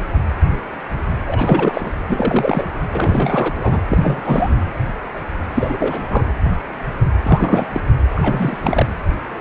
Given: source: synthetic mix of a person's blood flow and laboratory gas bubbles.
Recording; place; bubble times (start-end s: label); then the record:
Doppler ultrasound of blood flow; precordium
1.27-1.91 s: bubbles
2.08-2.68 s: bubbles
2.91-3.82 s: bubbles
3.88-4.21 s: bubbles
4.24-4.65 s: bubbles
5.54-6.31 s: bubbles
7.23-7.68 s: bubbles
7.72-7.80 s: bubbles
8.15-8.86 s: bubbles
From the record:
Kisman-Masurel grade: 332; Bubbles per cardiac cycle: rolling drumbeat, 9 or more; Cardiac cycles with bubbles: 50 to 99%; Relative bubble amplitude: moderate (0.250 to 0.450); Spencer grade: 3 (all of the cardiac periods contain showers or single bubble signals, but not dominating or overriding the cardiac motion signals); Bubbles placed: anywhere in the cardiac cycle